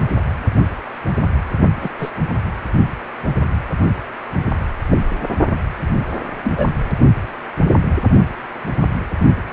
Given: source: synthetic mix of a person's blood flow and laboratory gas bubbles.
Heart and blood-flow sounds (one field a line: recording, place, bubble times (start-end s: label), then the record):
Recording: Doppler ultrasound of blood flow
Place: precordium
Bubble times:
1.80-1.91 s: bubbles
1.99-2.11 s: bubbles
4.90-4.98 s: bubbles
6.43-6.52 s: bubbles
6.57-6.67 s: bubbles
From the record:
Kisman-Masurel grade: 122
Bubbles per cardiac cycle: 1 to 2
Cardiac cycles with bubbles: 10 to 50%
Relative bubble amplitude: moderate (0.250 to 0.450)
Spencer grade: 2 (many but less than half of the cardiac periods contain bubble signals, singularly or in groups)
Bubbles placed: only in the low amplitude regions of the cardiac cycle